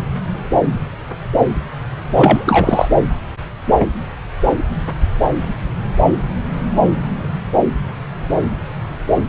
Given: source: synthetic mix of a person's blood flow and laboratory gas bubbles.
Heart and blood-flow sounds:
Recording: Doppler ultrasound of blood flow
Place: subclavian vein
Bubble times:
2.15-2.88 s: bubbles
From the record:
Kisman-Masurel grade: 213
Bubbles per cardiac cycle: several, 3 to 8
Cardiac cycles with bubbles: 1 to 10%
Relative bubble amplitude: loud (0.450 to 0.775)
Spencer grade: 1 (occasional bubble signal discernible with the cardiac motion signal, with majority of cardiac periods free of bubbles)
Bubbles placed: anywhere in the cardiac cycle

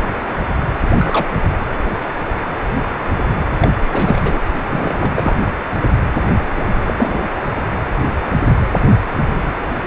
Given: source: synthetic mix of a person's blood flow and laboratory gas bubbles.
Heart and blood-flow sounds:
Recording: Doppler ultrasound of blood flow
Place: precordium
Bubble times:
0.97-1.38 s: bubbles
3.60-3.70 s: bubbles
3.91-4.41 s: bubbles
4.69-5.36 s: bubbles
6.56-6.64 s: bubbles
6.84-6.94 s: bubbles
6.97-7.23 s: bubbles
From the record:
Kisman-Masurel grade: 222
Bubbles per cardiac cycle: several, 3 to 8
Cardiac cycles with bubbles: 10 to 50%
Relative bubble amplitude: moderate (0.250 to 0.450)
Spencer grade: 2 (many but less than half of the cardiac periods contain bubble signals, singularly or in groups)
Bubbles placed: anywhere in the cardiac cycle

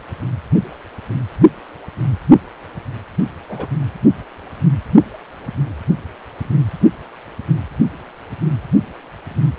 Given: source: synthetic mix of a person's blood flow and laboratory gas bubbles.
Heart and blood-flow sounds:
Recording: Doppler ultrasound of blood flow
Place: precordium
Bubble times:
3.48-3.69 s: bubbles
From the record:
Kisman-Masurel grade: 111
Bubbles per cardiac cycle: 1 to 2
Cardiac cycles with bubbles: 1 to 10%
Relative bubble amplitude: barely perceptible (0.100 to 0.250)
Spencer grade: 1 (occasional bubble signal discernible with the cardiac motion signal, with majority of cardiac periods free of bubbles)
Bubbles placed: only in the low amplitude regions of the cardiac cycle

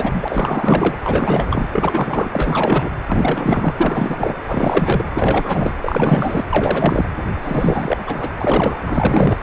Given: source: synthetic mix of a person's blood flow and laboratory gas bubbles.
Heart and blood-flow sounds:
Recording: Doppler ultrasound of blood flow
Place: precordium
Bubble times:
0.00-0.97 s: bubbles
1.03-1.69 s: bubbles
1.72-2.90 s: bubbles
3.06-3.73 s: bubbles
3.77-4.39 s: bubbles
4.48-5.05 s: bubbles
5.14-5.73 s: bubbles
5.81-6.44 s: bubbles
6.49-7.08 s: bubbles
7.42-7.97 s: bubbles
8.06-8.30 s: bubbles
8.40-8.79 s: bubbles
8.82-9.37 s: bubbles
From the record:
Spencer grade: 4 (maximum detectable bubble signal sounding continuously throughout systole and diastole of every cardiac period, and overriding the amplitude of the normal cardiac signals)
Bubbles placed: anywhere in the cardiac cycle

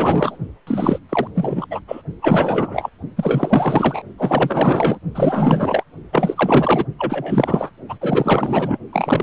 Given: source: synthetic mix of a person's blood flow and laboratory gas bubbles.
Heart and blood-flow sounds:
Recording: Doppler ultrasound of blood flow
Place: precordium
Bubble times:
0.00-0.38 s: bubbles
0.66-0.98 s: bubbles
1.09-1.27 s: bubbles
1.35-1.67 s: bubbles
1.71-1.81 s: bubbles
1.88-2.02 s: bubbles
2.22-2.90 s: bubbles
3.17-4.02 s: bubbles
4.17-4.99 s: bubbles
5.14-5.83 s: bubbles
6.12-6.85 s: bubbles
6.98-7.71 s: bubbles
7.88-7.98 s: bubbles
8.01-8.78 s: bubbles
8.92-9.23 s: bubbles
From the record:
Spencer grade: 4 (maximum detectable bubble signal sounding continuously throughout systole and diastole of every cardiac period, and overriding the amplitude of the normal cardiac signals)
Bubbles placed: only in the low amplitude regions of the cardiac cycle

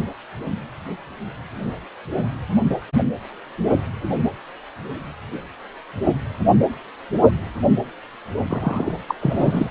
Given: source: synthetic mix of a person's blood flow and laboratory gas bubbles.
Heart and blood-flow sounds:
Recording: Doppler ultrasound of blood flow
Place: precordium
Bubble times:
8.47-8.94 s: bubbles
9.08-9.15 s: bubbles
9.21-9.70 s: bubbles
From the record:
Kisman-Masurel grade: 212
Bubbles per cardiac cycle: several, 3 to 8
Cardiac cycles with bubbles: 1 to 10%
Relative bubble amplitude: moderate (0.250 to 0.450)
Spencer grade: 1 (occasional bubble signal discernible with the cardiac motion signal, with majority of cardiac periods free of bubbles)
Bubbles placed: only in the low amplitude regions of the cardiac cycle

